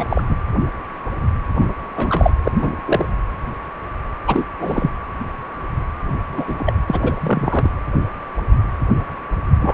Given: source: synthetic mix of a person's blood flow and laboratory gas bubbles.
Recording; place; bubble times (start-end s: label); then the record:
Doppler ultrasound of blood flow; precordium
0.00-0.05 s: bubbles
0.09-0.23 s: bubbles
0.27-0.35 s: bubbles
1.60-1.69 s: bubbles
1.96-2.31 s: bubbles
2.44-2.52 s: bubbles
2.61-2.76 s: bubbles
2.85-3.06 s: bubbles
4.26-4.46 s: bubbles
4.60-4.92 s: bubbles
6.32-6.44 s: bubbles
6.47-6.73 s: bubbles
6.88-7.70 s: bubbles
9.60-9.74 s: bubbles
From the record:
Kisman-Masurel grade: 232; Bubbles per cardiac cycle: several, 3 to 8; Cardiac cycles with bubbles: 50 to 99%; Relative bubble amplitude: moderate (0.250 to 0.450); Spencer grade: 3 (all of the cardiac periods contain showers or single bubble signals, but not dominating or overriding the cardiac motion signals); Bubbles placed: anywhere in the cardiac cycle